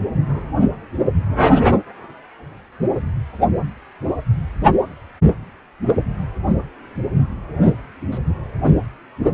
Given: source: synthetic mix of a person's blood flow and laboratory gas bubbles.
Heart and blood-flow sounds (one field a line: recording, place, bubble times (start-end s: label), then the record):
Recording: Doppler ultrasound of blood flow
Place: precordium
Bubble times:
7.66-7.77 s: bubbles
8.11-8.19 s: bubbles
8.66-8.73 s: bubbles
From the record:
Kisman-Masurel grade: 122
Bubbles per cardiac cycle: 1 to 2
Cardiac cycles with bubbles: 10 to 50%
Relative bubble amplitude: moderate (0.250 to 0.450)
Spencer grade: 2 (many but less than half of the cardiac periods contain bubble signals, singularly or in groups)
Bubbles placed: anywhere in the cardiac cycle